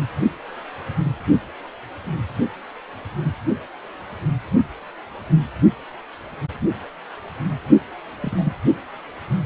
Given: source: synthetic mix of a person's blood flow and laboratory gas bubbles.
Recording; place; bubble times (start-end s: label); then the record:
Doppler ultrasound of blood flow; precordium
8.21-8.53 s: bubbles
From the record:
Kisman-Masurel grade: 111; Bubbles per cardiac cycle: 1 to 2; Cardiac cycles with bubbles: 1 to 10%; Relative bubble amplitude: barely perceptible (0.100 to 0.250); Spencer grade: 1 (occasional bubble signal discernible with the cardiac motion signal, with majority of cardiac periods free of bubbles); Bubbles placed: only in the low amplitude regions of the cardiac cycle